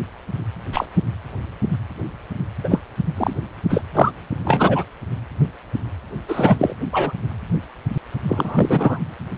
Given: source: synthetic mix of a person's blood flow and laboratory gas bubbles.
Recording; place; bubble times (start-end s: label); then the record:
Doppler ultrasound of blood flow; precordium
0.73-0.86 s: bubbles
2.63-2.81 s: bubbles
3.17-3.33 s: bubbles
3.69-3.81 s: bubbles
3.94-4.12 s: bubbles
4.44-4.83 s: bubbles
6.27-6.74 s: bubbles
6.92-7.12 s: bubbles
8.29-8.99 s: bubbles
From the record:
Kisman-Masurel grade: 233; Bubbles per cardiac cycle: several, 3 to 8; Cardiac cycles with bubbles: 50 to 99%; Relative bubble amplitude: loud (0.450 to 0.775); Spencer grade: 3 (all of the cardiac periods contain showers or single bubble signals, but not dominating or overriding the cardiac motion signals); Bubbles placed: anywhere in the cardiac cycle